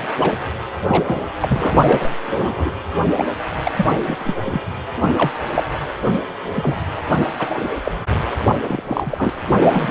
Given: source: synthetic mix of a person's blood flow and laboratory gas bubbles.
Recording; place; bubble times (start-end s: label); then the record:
Doppler ultrasound of blood flow; precordium
0.19-0.33 s: bubbles
0.87-1.20 s: bubbles
1.41-2.11 s: bubbles
2.26-2.71 s: bubbles
3.04-3.12 s: bubbles
3.16-3.25 s: bubbles
3.65-3.72 s: bubbles
3.77-3.85 s: bubbles
4.04-4.17 s: bubbles
4.19-4.34 s: bubbles
4.44-4.62 s: bubbles
4.95-5.15 s: bubbles
5.17-5.32 s: bubbles
5.54-5.63 s: bubbles
6.55-6.75 s: bubbles
7.39-7.68 s: bubbles
7.83-7.92 s: bubbles
8.52-8.56 s: bubbles
8.65-8.82 s: bubbles
8.86-9.30 s: bubbles
9.47-9.88 s: bubbles
From the record:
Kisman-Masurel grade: 242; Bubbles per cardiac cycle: several, 3 to 8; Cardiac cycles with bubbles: 100%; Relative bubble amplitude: moderate (0.250 to 0.450); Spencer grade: 3 (all of the cardiac periods contain showers or single bubble signals, but not dominating or overriding the cardiac motion signals); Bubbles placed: anywhere in the cardiac cycle